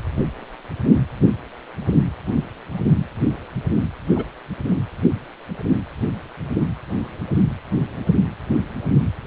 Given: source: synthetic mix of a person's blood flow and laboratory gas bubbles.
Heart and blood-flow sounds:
Doppler ultrasound of blood flow; precordium
4.15-4.24 s: bubbles
From the record:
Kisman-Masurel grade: 112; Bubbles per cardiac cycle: 1 to 2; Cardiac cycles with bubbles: 1 to 10%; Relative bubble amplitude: moderate (0.250 to 0.450); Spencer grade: 1 (occasional bubble signal discernible with the cardiac motion signal, with majority of cardiac periods free of bubbles); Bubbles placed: anywhere in the cardiac cycle

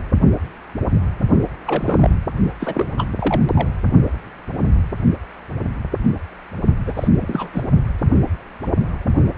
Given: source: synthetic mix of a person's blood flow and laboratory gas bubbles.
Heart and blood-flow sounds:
Doppler ultrasound of blood flow; precordium
1.66-2.11 s: bubbles
2.59-2.88 s: bubbles
2.97-3.10 s: bubbles
3.18-3.42 s: bubbles
3.54-3.68 s: bubbles
6.86-7.08 s: bubbles
7.21-7.50 s: bubbles
7.53-7.62 s: bubbles
From the record:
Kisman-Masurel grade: 222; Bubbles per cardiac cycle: several, 3 to 8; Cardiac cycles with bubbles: 10 to 50%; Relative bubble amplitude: moderate (0.250 to 0.450); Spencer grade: 2 (many but less than half of the cardiac periods contain bubble signals, singularly or in groups); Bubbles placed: only in the low amplitude regions of the cardiac cycle

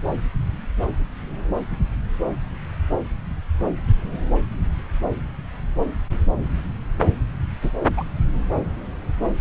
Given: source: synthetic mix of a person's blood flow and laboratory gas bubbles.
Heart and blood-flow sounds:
Doppler ultrasound of blood flow; subclavian vein
7.62-7.71 s: bubbles
7.96-8.04 s: bubbles
From the record:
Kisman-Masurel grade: 113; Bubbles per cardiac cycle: 1 to 2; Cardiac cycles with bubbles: 1 to 10%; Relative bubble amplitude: loud (0.450 to 0.775); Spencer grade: 1 (occasional bubble signal discernible with the cardiac motion signal, with majority of cardiac periods free of bubbles); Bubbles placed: anywhere in the cardiac cycle

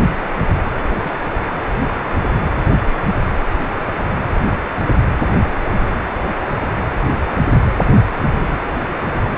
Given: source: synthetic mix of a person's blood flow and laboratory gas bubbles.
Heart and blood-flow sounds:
Doppler ultrasound of blood flow; precordium
1.01-1.12 s: bubbles
8.41-8.46 s: bubbles
From the record:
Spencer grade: 2 (many but less than half of the cardiac periods contain bubble signals, singularly or in groups); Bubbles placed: anywhere in the cardiac cycle

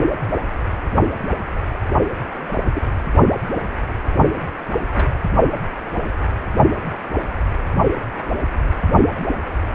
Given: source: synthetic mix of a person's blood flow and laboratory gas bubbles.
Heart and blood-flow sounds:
Doppler ultrasound of blood flow; precordium
2.48-2.52 s: bubbles
2.73-2.82 s: bubbles
4.91-5.06 s: bubbles
From the record:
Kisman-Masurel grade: 121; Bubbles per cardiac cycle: 1 to 2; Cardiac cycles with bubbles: 10 to 50%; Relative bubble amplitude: barely perceptible (0.100 to 0.250); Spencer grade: 2 (many but less than half of the cardiac periods contain bubble signals, singularly or in groups); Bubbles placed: only in the low amplitude regions of the cardiac cycle

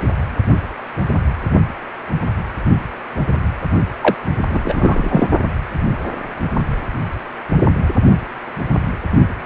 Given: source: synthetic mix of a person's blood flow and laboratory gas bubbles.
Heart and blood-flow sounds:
Doppler ultrasound of blood flow; precordium
4.01-4.14 s: bubbles
4.49-5.29 s: bubbles
From the record:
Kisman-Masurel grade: 213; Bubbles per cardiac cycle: several, 3 to 8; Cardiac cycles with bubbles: 1 to 10%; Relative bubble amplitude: loud (0.450 to 0.775); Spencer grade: 1 (occasional bubble signal discernible with the cardiac motion signal, with majority of cardiac periods free of bubbles); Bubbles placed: only in the low amplitude regions of the cardiac cycle

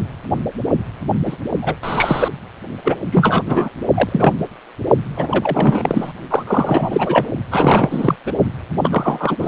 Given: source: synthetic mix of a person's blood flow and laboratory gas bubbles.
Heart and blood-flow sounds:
Doppler ultrasound of blood flow; precordium
1.25-1.36 s: bubbles
1.61-1.74 s: bubbles
1.83-2.29 s: bubbles
2.84-2.96 s: bubbles
3.11-3.42 s: bubbles
3.46-3.70 s: bubbles
3.95-4.33 s: bubbles
5.17-6.13 s: bubbles
6.30-6.43 s: bubbles
6.46-7.27 s: bubbles
7.51-8.15 s: bubbles
8.26-8.32 s: bubbles
8.81-9.48 s: bubbles
From the record:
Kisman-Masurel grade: 333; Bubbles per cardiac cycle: rolling drumbeat, 9 or more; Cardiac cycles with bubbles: 50 to 99%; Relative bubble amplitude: loud (0.450 to 0.775); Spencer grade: 3 (all of the cardiac periods contain showers or single bubble signals, but not dominating or overriding the cardiac motion signals); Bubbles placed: anywhere in the cardiac cycle

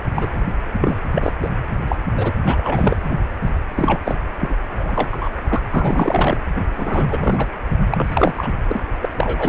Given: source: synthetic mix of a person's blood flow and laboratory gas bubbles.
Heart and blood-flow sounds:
Doppler ultrasound of blood flow; precordium
0.15-0.27 s: bubbles
0.81-0.97 s: bubbles
1.15-1.32 s: bubbles
1.42-1.50 s: bubbles
1.90-1.96 s: bubbles
2.17-2.31 s: bubbles
2.45-3.17 s: bubbles
3.75-4.00 s: bubbles
4.05-4.17 s: bubbles
4.40-4.55 s: bubbles
4.79-5.29 s: bubbles
5.48-5.62 s: bubbles
5.71-6.38 s: bubbles
6.76-7.47 s: bubbles
7.91-8.47 s: bubbles
8.68-8.80 s: bubbles
9.01-9.09 s: bubbles
9.15-9.49 s: bubbles
From the record:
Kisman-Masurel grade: 342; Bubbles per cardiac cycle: rolling drumbeat, 9 or more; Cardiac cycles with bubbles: 100%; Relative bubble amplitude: moderate (0.250 to 0.450); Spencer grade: 3 (all of the cardiac periods contain showers or single bubble signals, but not dominating or overriding the cardiac motion signals); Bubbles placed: only in the low amplitude regions of the cardiac cycle

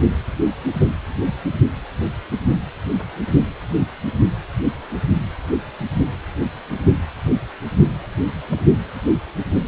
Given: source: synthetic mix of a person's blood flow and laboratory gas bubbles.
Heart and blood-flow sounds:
Doppler ultrasound of blood flow; precordium
8.03-8.07 s: bubbles
8.49-8.59 s: bubbles
From the record:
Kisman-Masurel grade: 111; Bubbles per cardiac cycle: 1 to 2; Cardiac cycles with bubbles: 1 to 10%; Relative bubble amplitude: barely perceptible (0.100 to 0.250); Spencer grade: 1 (occasional bubble signal discernible with the cardiac motion signal, with majority of cardiac periods free of bubbles); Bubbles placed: only in the low amplitude regions of the cardiac cycle

